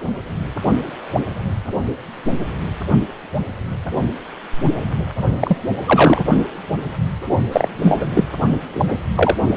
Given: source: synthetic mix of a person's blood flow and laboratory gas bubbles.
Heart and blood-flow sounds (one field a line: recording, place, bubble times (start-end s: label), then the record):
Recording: Doppler ultrasound of blood flow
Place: precordium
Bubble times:
5.39-5.58 s: bubbles
5.86-6.25 s: bubbles
7.52-7.68 s: bubbles
7.82-8.11 s: bubbles
8.14-8.24 s: bubbles
8.74-8.95 s: bubbles
9.16-9.36 s: bubbles
From the record:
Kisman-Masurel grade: 223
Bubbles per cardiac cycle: several, 3 to 8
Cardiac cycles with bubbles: 10 to 50%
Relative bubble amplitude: loud (0.450 to 0.775)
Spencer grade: 2 (many but less than half of the cardiac periods contain bubble signals, singularly or in groups)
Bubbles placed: only in the low amplitude regions of the cardiac cycle